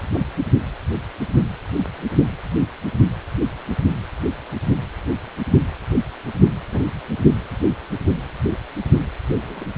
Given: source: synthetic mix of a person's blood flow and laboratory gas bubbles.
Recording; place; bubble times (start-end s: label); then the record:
Doppler ultrasound of blood flow; precordium
0.14-0.19 s: bubbles
6.72-6.83 s: bubbles
9.35-9.66 s: bubbles
From the record:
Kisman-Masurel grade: 121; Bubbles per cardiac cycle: 1 to 2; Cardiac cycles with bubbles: 10 to 50%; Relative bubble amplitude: barely perceptible (0.100 to 0.250); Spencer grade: 2 (many but less than half of the cardiac periods contain bubble signals, singularly or in groups); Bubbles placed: only in the low amplitude regions of the cardiac cycle